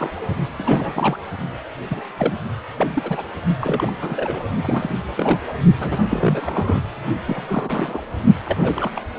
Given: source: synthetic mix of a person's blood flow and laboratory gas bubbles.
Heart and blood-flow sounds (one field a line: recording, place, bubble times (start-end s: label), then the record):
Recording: Doppler ultrasound of blood flow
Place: precordium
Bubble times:
0.00-0.12 s: bubbles
0.57-1.18 s: bubbles
1.91-2.04 s: bubbles
2.17-2.33 s: bubbles
2.77-3.24 s: bubbles
3.60-3.92 s: bubbles
4.01-4.44 s: bubbles
4.63-4.95 s: bubbles
5.17-5.38 s: bubbles
5.79-5.99 s: bubbles
6.10-6.81 s: bubbles
7.26-8.01 s: bubbles
8.46-8.90 s: bubbles
8.94-9.02 s: bubbles
From the record:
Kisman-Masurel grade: 342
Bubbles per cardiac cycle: rolling drumbeat, 9 or more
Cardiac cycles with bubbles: 100%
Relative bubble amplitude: moderate (0.250 to 0.450)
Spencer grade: 3 (all of the cardiac periods contain showers or single bubble signals, but not dominating or overriding the cardiac motion signals)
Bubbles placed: only in the low amplitude regions of the cardiac cycle